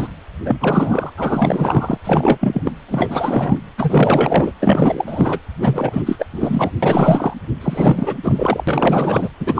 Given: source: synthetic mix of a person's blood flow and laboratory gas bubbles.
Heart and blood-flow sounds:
Doppler ultrasound of blood flow; precordium
0.00-0.07 s: bubbles
0.45-1.11 s: bubbles
1.17-1.97 s: bubbles
2.04-2.72 s: bubbles
2.88-3.58 s: bubbles
3.77-4.52 s: bubbles
4.60-5.40 s: bubbles
5.61-6.02 s: bubbles
6.06-6.26 s: bubbles
6.32-6.71 s: bubbles
6.82-7.33 s: bubbles
7.61-8.16 s: bubbles
8.23-8.64 s: bubbles
8.67-9.29 s: bubbles
9.39-9.60 s: bubbles
From the record:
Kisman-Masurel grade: 444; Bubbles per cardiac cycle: continuous sound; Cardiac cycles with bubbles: 100%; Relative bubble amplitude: maximal (0.775 to 0.999); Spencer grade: 4 (maximum detectable bubble signal sounding continuously throughout systole and diastole of every cardiac period, and overriding the amplitude of the normal cardiac signals); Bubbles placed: anywhere in the cardiac cycle

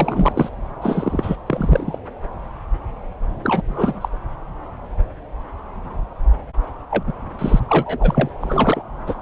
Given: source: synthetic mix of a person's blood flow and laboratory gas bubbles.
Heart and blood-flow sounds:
Doppler ultrasound of blood flow; subclavian vein
0.00-0.49 s: bubbles
0.82-1.36 s: bubbles
1.46-1.99 s: bubbles
3.43-3.62 s: bubbles
3.67-4.08 s: bubbles
6.90-7.03 s: bubbles
7.06-7.13 s: bubbles
7.39-7.60 s: bubbles
7.68-8.29 s: bubbles
8.40-8.83 s: bubbles
9.06-9.15 s: bubbles
From the record:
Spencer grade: 3 (all of the cardiac periods contain showers or single bubble signals, but not dominating or overriding the cardiac motion signals); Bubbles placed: anywhere in the cardiac cycle

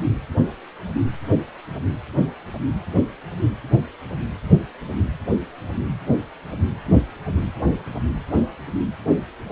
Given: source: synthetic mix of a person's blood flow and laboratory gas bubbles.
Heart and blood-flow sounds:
Doppler ultrasound of blood flow; precordium
no bubbles
From the record:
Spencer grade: 0 (complete lack of bubble signals)

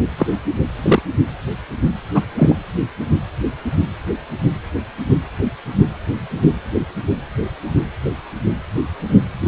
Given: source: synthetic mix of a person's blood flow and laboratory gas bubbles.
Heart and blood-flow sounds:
Doppler ultrasound of blood flow; precordium
0.18-0.27 s: bubbles
0.82-1.02 s: bubbles
2.15-2.22 s: bubbles
2.38-2.54 s: bubbles
From the record:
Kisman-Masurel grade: 123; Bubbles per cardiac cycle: 1 to 2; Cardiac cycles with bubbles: 10 to 50%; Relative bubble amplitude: loud (0.450 to 0.775); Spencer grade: 2 (many but less than half of the cardiac periods contain bubble signals, singularly or in groups); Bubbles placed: anywhere in the cardiac cycle

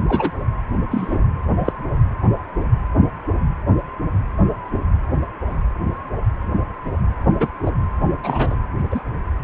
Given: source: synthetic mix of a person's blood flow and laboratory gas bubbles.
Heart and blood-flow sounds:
Doppler ultrasound of blood flow; precordium
0.08-0.32 s: bubbles
0.91-1.19 s: bubbles
1.58-1.73 s: bubbles
7.40-7.46 s: bubbles
7.66-7.71 s: bubbles
8.23-8.55 s: bubbles
8.90-9.01 s: bubbles
From the record:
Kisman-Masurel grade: 122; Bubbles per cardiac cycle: 1 to 2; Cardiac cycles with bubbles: 10 to 50%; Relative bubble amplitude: moderate (0.250 to 0.450); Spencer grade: 2 (many but less than half of the cardiac periods contain bubble signals, singularly or in groups); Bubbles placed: anywhere in the cardiac cycle

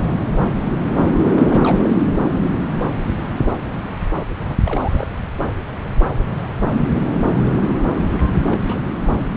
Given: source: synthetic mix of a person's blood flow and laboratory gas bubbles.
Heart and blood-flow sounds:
Doppler ultrasound of blood flow; subclavian vein
1.34-1.90 s: bubbles
4.37-4.56 s: bubbles
4.64-5.07 s: bubbles
8.50-8.58 s: bubbles
8.67-8.81 s: bubbles
9.19-9.26 s: bubbles
From the record:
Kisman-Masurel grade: 221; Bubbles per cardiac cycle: several, 3 to 8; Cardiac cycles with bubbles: 10 to 50%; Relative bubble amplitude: barely perceptible (0.100 to 0.250); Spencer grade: 2 (many but less than half of the cardiac periods contain bubble signals, singularly or in groups); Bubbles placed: anywhere in the cardiac cycle

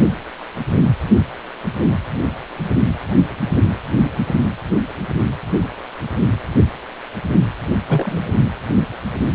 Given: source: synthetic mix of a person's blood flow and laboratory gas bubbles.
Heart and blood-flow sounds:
Doppler ultrasound of blood flow; precordium
7.70-7.75 s: bubbles
7.88-8.22 s: bubbles
From the record:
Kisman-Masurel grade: 222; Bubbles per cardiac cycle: several, 3 to 8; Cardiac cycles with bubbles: 10 to 50%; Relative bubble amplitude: moderate (0.250 to 0.450); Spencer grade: 2 (many but less than half of the cardiac periods contain bubble signals, singularly or in groups); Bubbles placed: only in the low amplitude regions of the cardiac cycle

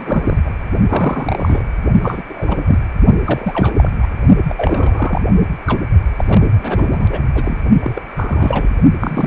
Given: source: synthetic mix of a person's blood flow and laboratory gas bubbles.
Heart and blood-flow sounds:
Doppler ultrasound of blood flow; precordium
0.00-0.38 s: bubbles
0.44-0.51 s: bubbles
0.89-1.63 s: bubbles
2.02-2.23 s: bubbles
2.28-2.79 s: bubbles
3.25-3.90 s: bubbles
4.01-4.08 s: bubbles
4.48-4.54 s: bubbles
4.57-5.21 s: bubbles
5.67-5.81 s: bubbles
6.17-7.08 s: bubbles
7.11-7.22 s: bubbles
7.34-7.56 s: bubbles
7.79-8.02 s: bubbles
8.08-8.69 s: bubbles
8.99-9.27 s: bubbles
From the record:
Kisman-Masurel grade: 342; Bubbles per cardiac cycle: rolling drumbeat, 9 or more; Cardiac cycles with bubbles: 100%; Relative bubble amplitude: moderate (0.250 to 0.450); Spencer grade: 3 (all of the cardiac periods contain showers or single bubble signals, but not dominating or overriding the cardiac motion signals); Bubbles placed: only in the low amplitude regions of the cardiac cycle

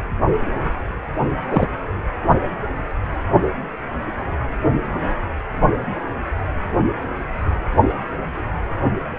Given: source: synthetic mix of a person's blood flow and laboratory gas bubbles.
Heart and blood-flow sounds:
Doppler ultrasound of blood flow; precordium
1.49-1.68 s: bubbles
From the record:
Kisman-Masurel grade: 113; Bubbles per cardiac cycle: 1 to 2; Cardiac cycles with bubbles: 1 to 10%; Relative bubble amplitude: loud (0.450 to 0.775); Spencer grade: 1 (occasional bubble signal discernible with the cardiac motion signal, with majority of cardiac periods free of bubbles); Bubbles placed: anywhere in the cardiac cycle

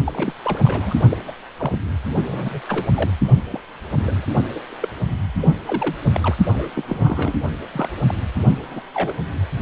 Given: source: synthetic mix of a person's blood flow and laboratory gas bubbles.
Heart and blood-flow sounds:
Doppler ultrasound of blood flow; precordium
0.05-0.34 s: bubbles
0.43-0.59 s: bubbles
0.62-0.98 s: bubbles
1.09-1.17 s: bubbles
1.27-1.32 s: bubbles
1.58-1.79 s: bubbles
2.25-2.61 s: bubbles
2.68-2.86 s: bubbles
2.94-3.10 s: bubbles
3.51-3.60 s: bubbles
3.93-4.26 s: bubbles
4.54-4.60 s: bubbles
4.69-4.94 s: bubbles
5.40-5.48 s: bubbles
5.66-5.96 s: bubbles
6.14-6.21 s: bubbles
6.23-6.35 s: bubbles
6.46-6.68 s: bubbles
6.76-6.84 s: bubbles
6.88-7.34 s: bubbles
7.72-7.89 s: bubbles
8.07-8.14 s: bubbles
8.70-8.82 s: bubbles
8.94-9.16 s: bubbles
From the record:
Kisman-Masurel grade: 242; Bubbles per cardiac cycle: several, 3 to 8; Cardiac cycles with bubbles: 100%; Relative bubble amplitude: moderate (0.250 to 0.450); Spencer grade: 3 (all of the cardiac periods contain showers or single bubble signals, but not dominating or overriding the cardiac motion signals); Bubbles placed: only in the low amplitude regions of the cardiac cycle

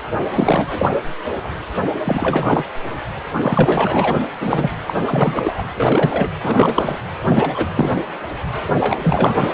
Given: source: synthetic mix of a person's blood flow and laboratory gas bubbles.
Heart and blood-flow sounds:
Doppler ultrasound of blood flow; precordium
0.34-0.89 s: bubbles
2.04-2.65 s: bubbles
3.42-4.17 s: bubbles
4.39-4.73 s: bubbles
4.86-4.93 s: bubbles
5.06-5.63 s: bubbles
5.77-6.29 s: bubbles
6.42-6.99 s: bubbles
7.27-7.67 s: bubbles
7.74-7.94 s: bubbles
8.75-9.37 s: bubbles
From the record:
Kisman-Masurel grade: 333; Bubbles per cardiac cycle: rolling drumbeat, 9 or more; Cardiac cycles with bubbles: 50 to 99%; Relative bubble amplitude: loud (0.450 to 0.775); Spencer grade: 3 (all of the cardiac periods contain showers or single bubble signals, but not dominating or overriding the cardiac motion signals); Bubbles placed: anywhere in the cardiac cycle

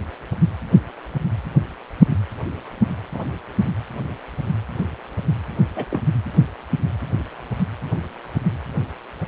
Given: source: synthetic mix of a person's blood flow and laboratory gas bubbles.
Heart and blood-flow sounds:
Doppler ultrasound of blood flow; precordium
3.14-3.25 s: bubbles
5.76-5.85 s: bubbles
5.91-6.02 s: bubbles
From the record:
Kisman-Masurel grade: 112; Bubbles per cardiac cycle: 1 to 2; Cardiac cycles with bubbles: 1 to 10%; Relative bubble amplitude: moderate (0.250 to 0.450); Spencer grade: 1 (occasional bubble signal discernible with the cardiac motion signal, with majority of cardiac periods free of bubbles); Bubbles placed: anywhere in the cardiac cycle

